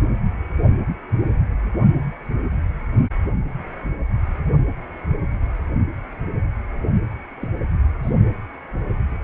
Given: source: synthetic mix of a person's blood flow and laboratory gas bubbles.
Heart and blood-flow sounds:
Doppler ultrasound of blood flow; precordium
7.42-7.48 s: bubbles
8.03-8.11 s: bubbles
From the record:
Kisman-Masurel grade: 111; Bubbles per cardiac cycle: 1 to 2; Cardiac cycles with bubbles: 1 to 10%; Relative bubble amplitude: barely perceptible (0.100 to 0.250); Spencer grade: 1 (occasional bubble signal discernible with the cardiac motion signal, with majority of cardiac periods free of bubbles); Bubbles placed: only in the low amplitude regions of the cardiac cycle

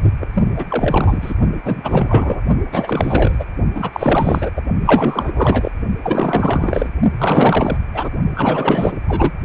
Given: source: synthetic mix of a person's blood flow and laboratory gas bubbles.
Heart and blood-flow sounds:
Doppler ultrasound of blood flow; precordium
0.20-0.28 s: bubbles
0.33-0.43 s: bubbles
0.56-1.34 s: bubbles
1.64-2.41 s: bubbles
2.71-3.44 s: bubbles
3.75-4.50 s: bubbles
4.56-4.62 s: bubbles
4.80-5.71 s: bubbles
6.03-6.90 s: bubbles
7.18-7.77 s: bubbles
7.93-8.10 s: bubbles
8.34-8.97 s: bubbles
9.07-9.32 s: bubbles
From the record:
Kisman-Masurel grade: 444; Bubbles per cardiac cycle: continuous sound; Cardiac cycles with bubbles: 100%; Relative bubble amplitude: maximal (0.775 to 0.999); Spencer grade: 4 (maximum detectable bubble signal sounding continuously throughout systole and diastole of every cardiac period, and overriding the amplitude of the normal cardiac signals); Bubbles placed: only in the low amplitude regions of the cardiac cycle

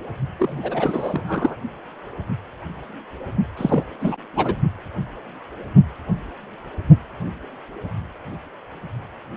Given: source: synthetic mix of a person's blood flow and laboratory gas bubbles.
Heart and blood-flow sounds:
Doppler ultrasound of blood flow; precordium
0.39-1.56 s: bubbles
3.57-3.84 s: bubbles
4.00-4.17 s: bubbles
4.33-4.54 s: bubbles
From the record:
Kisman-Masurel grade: 332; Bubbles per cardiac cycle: rolling drumbeat, 9 or more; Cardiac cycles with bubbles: 50 to 99%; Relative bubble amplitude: moderate (0.250 to 0.450); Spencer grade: 3 (all of the cardiac periods contain showers or single bubble signals, but not dominating or overriding the cardiac motion signals); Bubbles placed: only in the low amplitude regions of the cardiac cycle

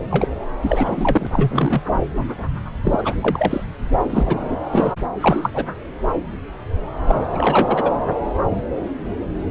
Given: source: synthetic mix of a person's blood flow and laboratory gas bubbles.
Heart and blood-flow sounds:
Doppler ultrasound of blood flow; subclavian vein
0.11-0.28 s: bubbles
0.62-1.82 s: bubbles
2.83-3.17 s: bubbles
3.21-3.66 s: bubbles
4.10-4.57 s: bubbles
4.72-4.93 s: bubbles
5.21-5.50 s: bubbles
5.53-5.66 s: bubbles
7.08-7.20 s: bubbles
7.33-7.91 s: bubbles
From the record:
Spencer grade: 3 (all of the cardiac periods contain showers or single bubble signals, but not dominating or overriding the cardiac motion signals); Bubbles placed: anywhere in the cardiac cycle

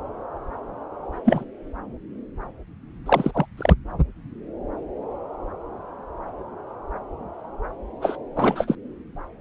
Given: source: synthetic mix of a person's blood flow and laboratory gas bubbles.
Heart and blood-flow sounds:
Doppler ultrasound of blood flow; subclavian vein
1.25-1.44 s: bubbles
3.06-3.31 s: bubbles
3.34-3.46 s: bubbles
3.57-3.74 s: bubbles
8.02-8.16 s: bubbles
8.36-8.75 s: bubbles
From the record:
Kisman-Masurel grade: 222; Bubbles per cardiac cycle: several, 3 to 8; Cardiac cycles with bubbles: 10 to 50%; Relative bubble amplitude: moderate (0.250 to 0.450); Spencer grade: 2 (many but less than half of the cardiac periods contain bubble signals, singularly or in groups); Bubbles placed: anywhere in the cardiac cycle

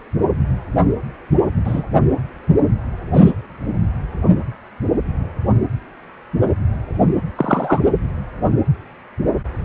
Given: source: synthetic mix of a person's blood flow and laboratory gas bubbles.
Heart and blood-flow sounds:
Doppler ultrasound of blood flow; precordium
1.65-1.83 s: bubbles
3.13-3.32 s: bubbles
7.36-7.81 s: bubbles
From the record:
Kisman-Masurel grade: 123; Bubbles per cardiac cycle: 1 to 2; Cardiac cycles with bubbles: 10 to 50%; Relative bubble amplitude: loud (0.450 to 0.775); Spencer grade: 2 (many but less than half of the cardiac periods contain bubble signals, singularly or in groups); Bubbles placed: only in the low amplitude regions of the cardiac cycle

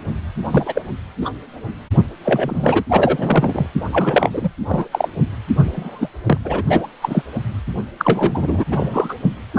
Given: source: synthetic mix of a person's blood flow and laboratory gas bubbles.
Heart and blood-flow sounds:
Doppler ultrasound of blood flow; precordium
0.51-0.82 s: bubbles
1.22-1.31 s: bubbles
2.24-2.83 s: bubbles
2.89-3.67 s: bubbles
3.92-4.31 s: bubbles
4.33-4.49 s: bubbles
4.69-4.86 s: bubbles
4.92-5.08 s: bubbles
5.64-6.08 s: bubbles
6.24-6.39 s: bubbles
6.44-6.62 s: bubbles
6.70-6.87 s: bubbles
7.02-7.22 s: bubbles
7.98-8.63 s: bubbles
8.71-9.15 s: bubbles
9.53-9.58 s: bubbles
From the record:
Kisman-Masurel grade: 243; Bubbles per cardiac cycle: several, 3 to 8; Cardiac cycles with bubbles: 100%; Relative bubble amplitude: loud (0.450 to 0.775); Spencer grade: 3 (all of the cardiac periods contain showers or single bubble signals, but not dominating or overriding the cardiac motion signals); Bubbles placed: anywhere in the cardiac cycle

